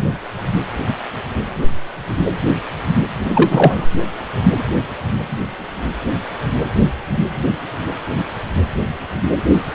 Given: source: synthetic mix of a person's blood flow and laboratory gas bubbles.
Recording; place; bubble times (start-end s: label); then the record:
Doppler ultrasound of blood flow; precordium
3.21-3.86 s: bubbles
From the record:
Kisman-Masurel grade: 213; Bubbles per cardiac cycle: several, 3 to 8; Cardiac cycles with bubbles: 1 to 10%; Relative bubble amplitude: loud (0.450 to 0.775); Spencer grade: 1 (occasional bubble signal discernible with the cardiac motion signal, with majority of cardiac periods free of bubbles); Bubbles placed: anywhere in the cardiac cycle